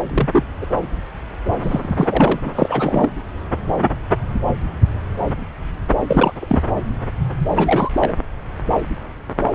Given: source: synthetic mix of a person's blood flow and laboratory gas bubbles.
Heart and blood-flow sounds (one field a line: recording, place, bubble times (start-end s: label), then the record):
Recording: Doppler ultrasound of blood flow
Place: subclavian vein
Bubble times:
0.10-0.29 s: bubbles
0.33-0.44 s: bubbles
0.61-0.67 s: bubbles
1.62-1.88 s: bubbles
1.97-2.40 s: bubbles
2.45-2.50 s: bubbles
2.55-3.09 s: bubbles
6.08-6.34 s: bubbles
6.41-6.62 s: bubbles
7.56-7.91 s: bubbles
8.00-8.14 s: bubbles
From the record:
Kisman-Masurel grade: 222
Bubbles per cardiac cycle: several, 3 to 8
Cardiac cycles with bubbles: 10 to 50%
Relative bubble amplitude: moderate (0.250 to 0.450)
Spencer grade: 2 (many but less than half of the cardiac periods contain bubble signals, singularly or in groups)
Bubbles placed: anywhere in the cardiac cycle